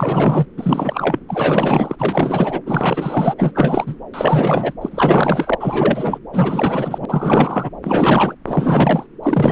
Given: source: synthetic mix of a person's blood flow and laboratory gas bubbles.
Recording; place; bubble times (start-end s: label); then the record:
Doppler ultrasound of blood flow; subclavian vein
0.00-0.46 s: bubbles
0.57-1.19 s: bubbles
1.29-1.96 s: bubbles
1.99-2.61 s: bubbles
2.66-3.34 s: bubbles
3.38-3.52 s: bubbles
3.54-3.96 s: bubbles
4.13-4.73 s: bubbles
4.81-5.55 s: bubbles
5.60-6.18 s: bubbles
6.33-7.05 s: bubbles
7.08-7.70 s: bubbles
7.83-8.36 s: bubbles
8.46-9.06 s: bubbles
9.23-9.52 s: bubbles
From the record:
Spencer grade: 4 (maximum detectable bubble signal sounding continuously throughout systole and diastole of every cardiac period, and overriding the amplitude of the normal cardiac signals); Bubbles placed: anywhere in the cardiac cycle